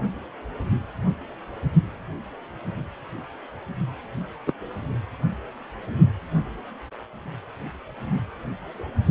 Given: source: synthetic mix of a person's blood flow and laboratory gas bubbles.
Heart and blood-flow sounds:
Doppler ultrasound of blood flow; precordium
4.47-4.53 s: bubbles
From the record:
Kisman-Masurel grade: 112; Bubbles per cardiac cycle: 1 to 2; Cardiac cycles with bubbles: 1 to 10%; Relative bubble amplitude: moderate (0.250 to 0.450); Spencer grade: 1 (occasional bubble signal discernible with the cardiac motion signal, with majority of cardiac periods free of bubbles); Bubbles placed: only in the low amplitude regions of the cardiac cycle

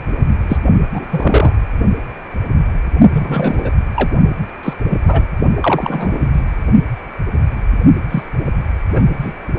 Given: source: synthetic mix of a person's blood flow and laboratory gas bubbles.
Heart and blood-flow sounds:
Doppler ultrasound of blood flow; precordium
0.48-0.57 s: bubbles
0.94-1.53 s: bubbles
3.12-3.70 s: bubbles
3.95-4.10 s: bubbles
4.63-4.74 s: bubbles
4.90-4.98 s: bubbles
5.07-5.22 s: bubbles
5.56-6.29 s: bubbles
6.33-6.42 s: bubbles
8.10-8.23 s: bubbles
8.94-9.05 s: bubbles
9.20-9.32 s: bubbles
From the record:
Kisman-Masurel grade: 233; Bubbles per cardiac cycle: several, 3 to 8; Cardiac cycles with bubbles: 50 to 99%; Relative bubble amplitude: loud (0.450 to 0.775); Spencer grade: 3 (all of the cardiac periods contain showers or single bubble signals, but not dominating or overriding the cardiac motion signals); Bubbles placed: only in the low amplitude regions of the cardiac cycle

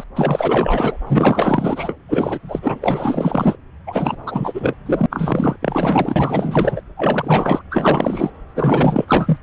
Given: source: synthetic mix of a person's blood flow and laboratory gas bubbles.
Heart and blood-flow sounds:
Doppler ultrasound of blood flow; subclavian vein
0.00-0.04 s: bubbles
0.15-0.97 s: bubbles
1.07-1.96 s: bubbles
2.08-2.38 s: bubbles
2.48-2.59 s: bubbles
2.62-2.78 s: bubbles
2.82-3.56 s: bubbles
3.86-4.16 s: bubbles
4.26-4.76 s: bubbles
4.86-5.06 s: bubbles
5.10-5.56 s: bubbles
5.62-6.81 s: bubbles
6.96-7.62 s: bubbles
7.71-8.30 s: bubbles
8.55-9.05 s: bubbles
9.08-9.38 s: bubbles
From the record:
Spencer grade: 4 (maximum detectable bubble signal sounding continuously throughout systole and diastole of every cardiac period, and overriding the amplitude of the normal cardiac signals); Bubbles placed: anywhere in the cardiac cycle

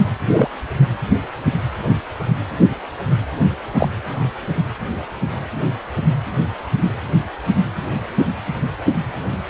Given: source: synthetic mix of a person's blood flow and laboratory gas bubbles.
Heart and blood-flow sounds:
Doppler ultrasound of blood flow; precordium
0.31-0.48 s: bubbles
3.77-3.88 s: bubbles
From the record:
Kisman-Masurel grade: 123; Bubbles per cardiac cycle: 1 to 2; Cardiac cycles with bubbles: 10 to 50%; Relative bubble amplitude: loud (0.450 to 0.775); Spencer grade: 2 (many but less than half of the cardiac periods contain bubble signals, singularly or in groups); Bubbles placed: anywhere in the cardiac cycle

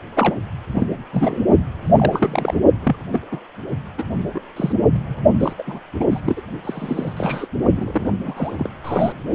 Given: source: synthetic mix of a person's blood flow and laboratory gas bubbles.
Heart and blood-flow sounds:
Doppler ultrasound of blood flow; precordium
0.16-0.35 s: bubbles
0.74-0.87 s: bubbles
1.12-1.40 s: bubbles
1.86-2.58 s: bubbles
2.83-2.96 s: bubbles
3.12-3.20 s: bubbles
3.31-3.40 s: bubbles
3.71-3.75 s: bubbles
3.98-4.04 s: bubbles
4.34-4.42 s: bubbles
4.56-4.73 s: bubbles
4.92-5.20 s: bubbles
5.40-5.53 s: bubbles
5.58-5.63 s: bubbles
5.67-5.81 s: bubbles
6.00-6.04 s: bubbles
6.10-6.20 s: bubbles
6.25-6.41 s: bubbles
6.64-7.13 s: bubbles
7.17-7.47 s: bubbles
7.76-8.10 s: bubbles
8.23-8.69 s: bubbles
8.84-9.12 s: bubbles
From the record:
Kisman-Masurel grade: 242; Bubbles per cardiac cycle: several, 3 to 8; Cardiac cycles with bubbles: 100%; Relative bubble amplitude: moderate (0.250 to 0.450); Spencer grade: 3 (all of the cardiac periods contain showers or single bubble signals, but not dominating or overriding the cardiac motion signals); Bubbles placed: only in the low amplitude regions of the cardiac cycle

